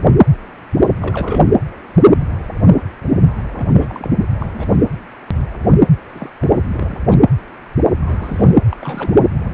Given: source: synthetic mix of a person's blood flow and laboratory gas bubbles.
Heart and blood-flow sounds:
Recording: Doppler ultrasound of blood flow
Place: precordium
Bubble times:
1.01-1.48 s: bubbles
3.55-4.08 s: bubbles
4.19-4.26 s: bubbles
4.30-4.36 s: bubbles
4.39-4.46 s: bubbles
4.54-4.66 s: bubbles
4.69-4.76 s: bubbles
6.15-6.30 s: bubbles
6.39-6.48 s: bubbles
6.72-6.97 s: bubbles
7.10-7.20 s: bubbles
8.01-8.59 s: bubbles
8.69-9.20 s: bubbles
From the record:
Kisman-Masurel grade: 221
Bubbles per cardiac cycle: several, 3 to 8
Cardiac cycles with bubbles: 10 to 50%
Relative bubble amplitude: barely perceptible (0.100 to 0.250)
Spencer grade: 2 (many but less than half of the cardiac periods contain bubble signals, singularly or in groups)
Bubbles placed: anywhere in the cardiac cycle

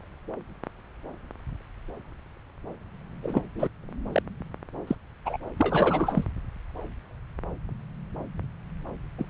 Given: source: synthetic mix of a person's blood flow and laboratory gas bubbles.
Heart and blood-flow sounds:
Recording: Doppler ultrasound of blood flow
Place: subclavian vein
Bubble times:
3.23-3.42 s: bubbles
3.55-3.68 s: bubbles
4.12-4.21 s: bubbles
4.87-4.95 s: bubbles
5.25-5.38 s: bubbles
5.56-6.24 s: bubbles
9.18-9.25 s: bubbles
From the record:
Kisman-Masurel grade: 221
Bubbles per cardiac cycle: several, 3 to 8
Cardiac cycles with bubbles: 10 to 50%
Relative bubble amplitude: barely perceptible (0.100 to 0.250)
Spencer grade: 2 (many but less than half of the cardiac periods contain bubble signals, singularly or in groups)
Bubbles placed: anywhere in the cardiac cycle

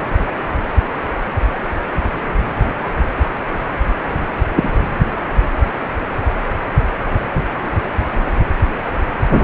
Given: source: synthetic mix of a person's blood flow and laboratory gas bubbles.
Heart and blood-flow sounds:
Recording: Doppler ultrasound of blood flow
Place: precordium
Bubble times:
4.55-4.69 s: bubbles
From the record:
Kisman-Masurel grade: 113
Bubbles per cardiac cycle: 1 to 2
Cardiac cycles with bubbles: 1 to 10%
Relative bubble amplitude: loud (0.450 to 0.775)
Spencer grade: 1 (occasional bubble signal discernible with the cardiac motion signal, with majority of cardiac periods free of bubbles)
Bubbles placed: anywhere in the cardiac cycle

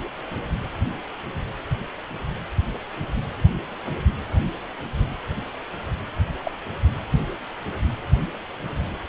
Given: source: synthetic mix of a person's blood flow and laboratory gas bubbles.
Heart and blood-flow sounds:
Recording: Doppler ultrasound of blood flow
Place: precordium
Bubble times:
6.44-6.51 s: bubbles
From the record:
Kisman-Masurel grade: 111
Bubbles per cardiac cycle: 1 to 2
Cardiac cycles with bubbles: 1 to 10%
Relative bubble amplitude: barely perceptible (0.100 to 0.250)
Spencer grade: 1 (occasional bubble signal discernible with the cardiac motion signal, with majority of cardiac periods free of bubbles)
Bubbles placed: anywhere in the cardiac cycle

